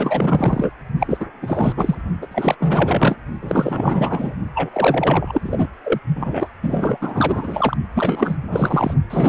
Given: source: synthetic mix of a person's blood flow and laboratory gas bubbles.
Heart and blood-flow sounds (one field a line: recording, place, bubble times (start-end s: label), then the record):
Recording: Doppler ultrasound of blood flow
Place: precordium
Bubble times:
0.00-0.73 s: bubbles
0.99-1.25 s: bubbles
1.42-1.74 s: bubbles
1.77-1.95 s: bubbles
2.21-2.27 s: bubbles
2.31-2.56 s: bubbles
2.60-3.16 s: bubbles
3.42-4.35 s: bubbles
4.54-4.70 s: bubbles
4.72-5.67 s: bubbles
5.84-6.00 s: bubbles
6.15-6.48 s: bubbles
6.62-6.97 s: bubbles
7.00-7.77 s: bubbles
7.94-8.37 s: bubbles
8.51-8.94 s: bubbles
9.10-9.29 s: bubbles
From the record:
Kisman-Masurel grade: 444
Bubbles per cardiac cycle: continuous sound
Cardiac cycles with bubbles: 100%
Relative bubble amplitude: maximal (0.775 to 0.999)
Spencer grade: 4 (maximum detectable bubble signal sounding continuously throughout systole and diastole of every cardiac period, and overriding the amplitude of the normal cardiac signals)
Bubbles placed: only in the low amplitude regions of the cardiac cycle